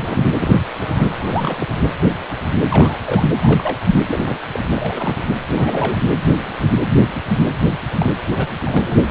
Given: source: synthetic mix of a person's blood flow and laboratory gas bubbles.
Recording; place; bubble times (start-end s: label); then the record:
Doppler ultrasound of blood flow; precordium
0.00-0.32 s: bubbles
0.40-0.54 s: bubbles
0.79-1.11 s: bubbles
1.19-1.58 s: bubbles
1.61-1.67 s: bubbles
2.69-2.99 s: bubbles
3.06-3.22 s: bubbles
3.43-3.76 s: bubbles
4.08-4.37 s: bubbles
4.52-4.60 s: bubbles
4.75-5.16 s: bubbles
5.55-5.97 s: bubbles
7.99-8.11 s: bubbles
8.37-8.47 s: bubbles
8.58-9.11 s: bubbles
From the record:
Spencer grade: 3 (all of the cardiac periods contain showers or single bubble signals, but not dominating or overriding the cardiac motion signals); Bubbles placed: anywhere in the cardiac cycle